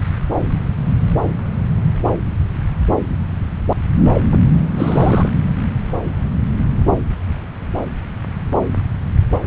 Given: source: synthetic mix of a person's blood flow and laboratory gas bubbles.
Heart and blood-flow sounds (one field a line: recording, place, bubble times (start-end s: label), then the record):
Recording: Doppler ultrasound of blood flow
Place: subclavian vein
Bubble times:
4.13-4.22 s: bubbles
4.30-4.39 s: bubbles
4.75-5.29 s: bubbles
From the record:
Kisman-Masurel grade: 213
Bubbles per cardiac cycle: several, 3 to 8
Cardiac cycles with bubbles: 1 to 10%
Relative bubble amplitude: loud (0.450 to 0.775)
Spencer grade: 1 (occasional bubble signal discernible with the cardiac motion signal, with majority of cardiac periods free of bubbles)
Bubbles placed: anywhere in the cardiac cycle